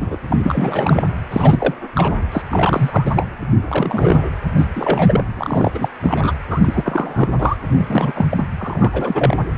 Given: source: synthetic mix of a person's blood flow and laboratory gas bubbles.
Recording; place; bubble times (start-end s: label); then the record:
Doppler ultrasound of blood flow; precordium
0.00-0.18 s: bubbles
0.28-1.03 s: bubbles
1.31-1.75 s: bubbles
1.95-2.17 s: bubbles
2.31-2.42 s: bubbles
2.51-3.27 s: bubbles
3.68-4.29 s: bubbles
4.57-4.67 s: bubbles
4.76-5.24 s: bubbles
5.37-5.88 s: bubbles
6.02-6.32 s: bubbles
6.50-7.27 s: bubbles
7.38-7.56 s: bubbles
7.74-7.86 s: bubbles
7.90-8.45 s: bubbles
8.58-9.37 s: bubbles
From the record:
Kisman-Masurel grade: 343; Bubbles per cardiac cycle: rolling drumbeat, 9 or more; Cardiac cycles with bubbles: 100%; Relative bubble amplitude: loud (0.450 to 0.775); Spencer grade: 3 (all of the cardiac periods contain showers or single bubble signals, but not dominating or overriding the cardiac motion signals); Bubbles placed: anywhere in the cardiac cycle